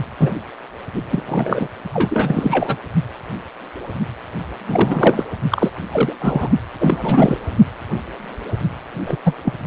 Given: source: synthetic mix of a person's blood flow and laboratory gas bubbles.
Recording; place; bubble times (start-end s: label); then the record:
Doppler ultrasound of blood flow; precordium
0.20-0.34 s: bubbles
0.94-1.02 s: bubbles
1.09-1.68 s: bubbles
1.94-2.77 s: bubbles
4.68-5.24 s: bubbles
5.50-5.70 s: bubbles
5.92-6.12 s: bubbles
6.18-6.49 s: bubbles
6.80-7.38 s: bubbles
9.06-9.16 s: bubbles
9.24-9.34 s: bubbles
9.45-9.54 s: bubbles
From the record:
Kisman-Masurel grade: 333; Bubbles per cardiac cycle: rolling drumbeat, 9 or more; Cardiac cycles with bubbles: 50 to 99%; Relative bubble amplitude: loud (0.450 to 0.775); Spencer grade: 3 (all of the cardiac periods contain showers or single bubble signals, but not dominating or overriding the cardiac motion signals); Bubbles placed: only in the low amplitude regions of the cardiac cycle